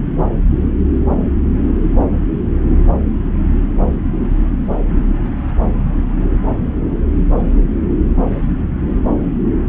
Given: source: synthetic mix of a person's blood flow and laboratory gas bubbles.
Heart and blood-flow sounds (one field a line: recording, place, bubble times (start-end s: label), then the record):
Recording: Doppler ultrasound of blood flow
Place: subclavian vein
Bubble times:
no bubbles
From the record:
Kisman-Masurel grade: 000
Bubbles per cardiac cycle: 0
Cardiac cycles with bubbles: 0%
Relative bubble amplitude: no bubbles discernible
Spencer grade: 0 (complete lack of bubble signals)